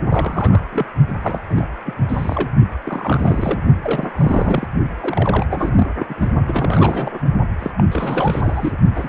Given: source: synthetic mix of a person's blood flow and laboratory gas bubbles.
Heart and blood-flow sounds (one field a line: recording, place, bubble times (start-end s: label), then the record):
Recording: Doppler ultrasound of blood flow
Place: precordium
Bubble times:
0.09-0.65 s: bubbles
0.72-0.86 s: bubbles
1.22-1.39 s: bubbles
1.49-1.67 s: bubbles
1.85-1.94 s: bubbles
2.08-2.48 s: bubbles
2.84-3.59 s: bubbles
3.82-4.66 s: bubbles
5.01-5.46 s: bubbles
5.50-5.71 s: bubbles
5.76-5.87 s: bubbles
5.99-6.06 s: bubbles
6.09-6.33 s: bubbles
6.46-7.19 s: bubbles
7.58-7.71 s: bubbles
7.77-7.84 s: bubbles
7.91-8.72 s: bubbles
8.96-9.09 s: bubbles
From the record:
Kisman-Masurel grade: 342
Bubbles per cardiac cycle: rolling drumbeat, 9 or more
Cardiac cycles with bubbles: 100%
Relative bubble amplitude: moderate (0.250 to 0.450)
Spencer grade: 3 (all of the cardiac periods contain showers or single bubble signals, but not dominating or overriding the cardiac motion signals)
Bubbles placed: only in the low amplitude regions of the cardiac cycle